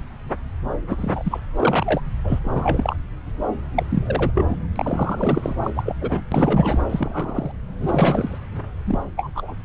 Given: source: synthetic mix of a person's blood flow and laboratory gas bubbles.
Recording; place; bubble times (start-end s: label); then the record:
Doppler ultrasound of blood flow; subclavian vein
0.89-1.40 s: bubbles
1.55-2.01 s: bubbles
2.24-2.39 s: bubbles
2.44-2.96 s: bubbles
3.77-4.31 s: bubbles
4.35-4.46 s: bubbles
4.49-4.55 s: bubbles
4.75-5.53 s: bubbles
5.62-5.71 s: bubbles
5.76-5.83 s: bubbles
5.85-5.96 s: bubbles
6.01-6.22 s: bubbles
6.31-6.78 s: bubbles
6.89-7.51 s: bubbles
7.81-8.38 s: bubbles
8.86-8.99 s: bubbles
9.17-9.30 s: bubbles
9.35-9.54 s: bubbles
From the record:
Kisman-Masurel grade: 232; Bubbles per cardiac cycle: several, 3 to 8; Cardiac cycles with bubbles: 50 to 99%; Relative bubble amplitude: moderate (0.250 to 0.450); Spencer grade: 3 (all of the cardiac periods contain showers or single bubble signals, but not dominating or overriding the cardiac motion signals); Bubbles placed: anywhere in the cardiac cycle